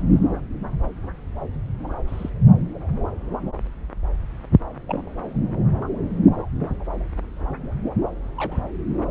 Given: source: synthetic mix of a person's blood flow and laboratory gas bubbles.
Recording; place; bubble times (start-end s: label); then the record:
Doppler ultrasound of blood flow; subclavian vein
2.07-2.29 s: bubbles
4.87-5.02 s: bubbles
8.37-8.60 s: bubbles
From the record:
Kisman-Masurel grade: 121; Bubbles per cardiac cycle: 1 to 2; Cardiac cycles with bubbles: 10 to 50%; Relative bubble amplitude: barely perceptible (0.100 to 0.250); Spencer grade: 2 (many but less than half of the cardiac periods contain bubble signals, singularly or in groups); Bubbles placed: anywhere in the cardiac cycle